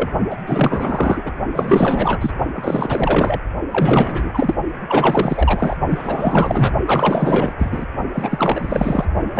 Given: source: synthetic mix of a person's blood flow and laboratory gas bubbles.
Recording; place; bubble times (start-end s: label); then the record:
Doppler ultrasound of blood flow; precordium
0.00-0.09 s: bubbles
0.30-0.36 s: bubbles
0.46-1.33 s: bubbles
1.54-2.18 s: bubbles
2.21-2.31 s: bubbles
2.55-3.40 s: bubbles
3.69-4.55 s: bubbles
4.88-5.76 s: bubbles
5.90-6.72 s: bubbles
6.86-7.53 s: bubbles
7.58-7.86 s: bubbles
8.13-9.05 s: bubbles
9.33-9.40 s: bubbles
From the record:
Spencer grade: 4 (maximum detectable bubble signal sounding continuously throughout systole and diastole of every cardiac period, and overriding the amplitude of the normal cardiac signals); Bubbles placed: only in the low amplitude regions of the cardiac cycle